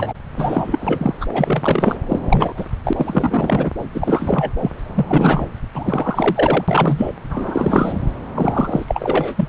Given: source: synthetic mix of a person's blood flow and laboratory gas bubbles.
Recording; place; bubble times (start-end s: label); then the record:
Doppler ultrasound of blood flow; subclavian vein
0.00-0.13 s: bubbles
0.37-1.25 s: bubbles
1.33-1.96 s: bubbles
2.09-2.19 s: bubbles
2.22-2.65 s: bubbles
2.84-2.93 s: bubbles
2.96-3.71 s: bubbles
3.94-4.51 s: bubbles
4.60-4.71 s: bubbles
4.94-5.06 s: bubbles
5.08-5.45 s: bubbles
5.75-7.13 s: bubbles
7.30-8.00 s: bubbles
8.35-9.34 s: bubbles
9.37-9.48 s: bubbles
From the record:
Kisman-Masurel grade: 342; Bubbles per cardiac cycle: rolling drumbeat, 9 or more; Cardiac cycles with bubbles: 100%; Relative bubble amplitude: moderate (0.250 to 0.450); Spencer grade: 3 (all of the cardiac periods contain showers or single bubble signals, but not dominating or overriding the cardiac motion signals); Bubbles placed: anywhere in the cardiac cycle